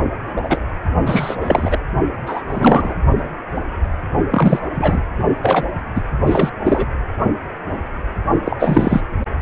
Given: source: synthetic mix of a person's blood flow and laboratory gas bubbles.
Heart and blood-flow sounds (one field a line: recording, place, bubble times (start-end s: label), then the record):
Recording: Doppler ultrasound of blood flow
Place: precordium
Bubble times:
0.35-0.60 s: bubbles
1.06-1.36 s: bubbles
1.40-1.78 s: bubbles
2.26-2.42 s: bubbles
2.50-2.94 s: bubbles
4.30-4.60 s: bubbles
4.72-5.02 s: bubbles
5.42-5.64 s: bubbles
5.95-6.02 s: bubbles
6.26-6.50 s: bubbles
6.64-6.86 s: bubbles
8.45-9.00 s: bubbles
From the record:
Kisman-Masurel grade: 333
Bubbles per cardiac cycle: rolling drumbeat, 9 or more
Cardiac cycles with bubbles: 50 to 99%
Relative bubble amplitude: loud (0.450 to 0.775)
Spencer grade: 3 (all of the cardiac periods contain showers or single bubble signals, but not dominating or overriding the cardiac motion signals)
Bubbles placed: only in the low amplitude regions of the cardiac cycle